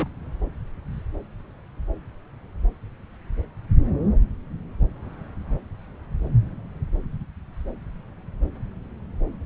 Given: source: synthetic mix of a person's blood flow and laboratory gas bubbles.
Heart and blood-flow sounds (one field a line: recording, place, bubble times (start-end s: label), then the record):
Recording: Doppler ultrasound of blood flow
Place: subclavian vein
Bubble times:
0.00-0.07 s: bubbles
From the record:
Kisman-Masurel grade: 111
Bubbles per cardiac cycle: 1 to 2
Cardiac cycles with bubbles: 1 to 10%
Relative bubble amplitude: barely perceptible (0.100 to 0.250)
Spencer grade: 1 (occasional bubble signal discernible with the cardiac motion signal, with majority of cardiac periods free of bubbles)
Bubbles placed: anywhere in the cardiac cycle